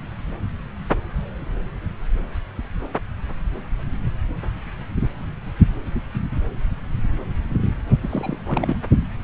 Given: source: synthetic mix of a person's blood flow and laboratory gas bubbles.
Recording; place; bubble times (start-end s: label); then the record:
Doppler ultrasound of blood flow; subclavian vein
8.02-8.37 s: bubbles
8.46-8.76 s: bubbles
From the record:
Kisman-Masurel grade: 221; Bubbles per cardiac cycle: several, 3 to 8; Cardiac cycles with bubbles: 10 to 50%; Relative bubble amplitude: barely perceptible (0.100 to 0.250); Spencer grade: 2 (many but less than half of the cardiac periods contain bubble signals, singularly or in groups); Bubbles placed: anywhere in the cardiac cycle